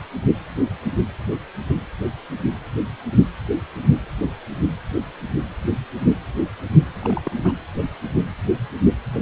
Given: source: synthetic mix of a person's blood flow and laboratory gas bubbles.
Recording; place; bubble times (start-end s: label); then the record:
Doppler ultrasound of blood flow; precordium
6.94-7.22 s: bubbles
7.25-7.32 s: bubbles
7.36-7.53 s: bubbles
From the record:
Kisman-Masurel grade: 211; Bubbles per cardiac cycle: several, 3 to 8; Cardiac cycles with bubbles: 1 to 10%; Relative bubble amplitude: barely perceptible (0.100 to 0.250); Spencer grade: 1 (occasional bubble signal discernible with the cardiac motion signal, with majority of cardiac periods free of bubbles); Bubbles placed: anywhere in the cardiac cycle